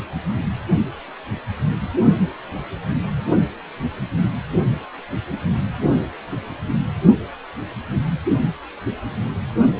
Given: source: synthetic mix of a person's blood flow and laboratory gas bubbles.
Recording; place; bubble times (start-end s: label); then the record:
Doppler ultrasound of blood flow; precordium
no bubbles
From the record:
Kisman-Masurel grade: 000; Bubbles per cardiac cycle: 0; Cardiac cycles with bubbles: 0%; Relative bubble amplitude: no bubbles discernible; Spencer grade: 0 (complete lack of bubble signals)